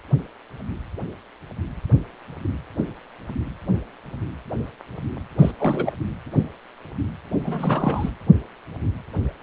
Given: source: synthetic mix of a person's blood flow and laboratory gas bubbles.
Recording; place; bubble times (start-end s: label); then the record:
Doppler ultrasound of blood flow; precordium
5.38-5.51 s: bubbles
5.59-5.93 s: bubbles
7.44-8.11 s: bubbles
From the record:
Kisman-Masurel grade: 222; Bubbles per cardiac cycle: several, 3 to 8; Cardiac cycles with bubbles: 10 to 50%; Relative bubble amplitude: moderate (0.250 to 0.450); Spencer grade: 2 (many but less than half of the cardiac periods contain bubble signals, singularly or in groups); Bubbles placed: anywhere in the cardiac cycle